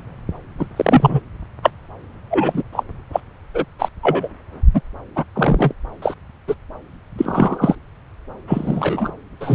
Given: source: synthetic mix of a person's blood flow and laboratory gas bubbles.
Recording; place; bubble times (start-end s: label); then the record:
Doppler ultrasound of blood flow; subclavian vein
0.59-0.67 s: bubbles
0.76-1.20 s: bubbles
1.62-1.71 s: bubbles
2.30-2.62 s: bubbles
2.72-2.83 s: bubbles
3.12-3.20 s: bubbles
3.53-3.65 s: bubbles
3.78-3.89 s: bubbles
4.02-4.28 s: bubbles
4.74-4.81 s: bubbles
5.16-5.25 s: bubbles
5.35-5.74 s: bubbles
6.02-6.14 s: bubbles
6.48-6.54 s: bubbles
7.17-7.75 s: bubbles
8.47-9.12 s: bubbles
9.40-9.55 s: bubbles
From the record:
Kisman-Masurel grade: 243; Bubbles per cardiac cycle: several, 3 to 8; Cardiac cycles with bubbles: 100%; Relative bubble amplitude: loud (0.450 to 0.775); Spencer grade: 3 (all of the cardiac periods contain showers or single bubble signals, but not dominating or overriding the cardiac motion signals); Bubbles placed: anywhere in the cardiac cycle